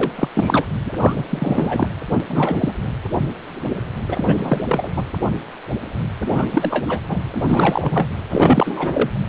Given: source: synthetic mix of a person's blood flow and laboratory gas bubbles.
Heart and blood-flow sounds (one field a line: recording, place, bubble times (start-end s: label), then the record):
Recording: Doppler ultrasound of blood flow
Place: precordium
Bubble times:
0.00-0.12 s: bubbles
0.16-0.29 s: bubbles
0.34-0.65 s: bubbles
0.85-0.93 s: bubbles
0.99-1.24 s: bubbles
1.29-1.88 s: bubbles
2.10-2.19 s: bubbles
2.27-2.73 s: bubbles
4.08-4.66 s: bubbles
4.69-4.93 s: bubbles
4.96-5.03 s: bubbles
6.18-7.00 s: bubbles
7.08-7.45 s: bubbles
7.48-8.08 s: bubbles
8.30-9.10 s: bubbles
From the record:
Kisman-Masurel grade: 333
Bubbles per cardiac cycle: rolling drumbeat, 9 or more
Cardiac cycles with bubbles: 50 to 99%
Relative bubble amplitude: loud (0.450 to 0.775)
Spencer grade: 3 (all of the cardiac periods contain showers or single bubble signals, but not dominating or overriding the cardiac motion signals)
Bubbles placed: anywhere in the cardiac cycle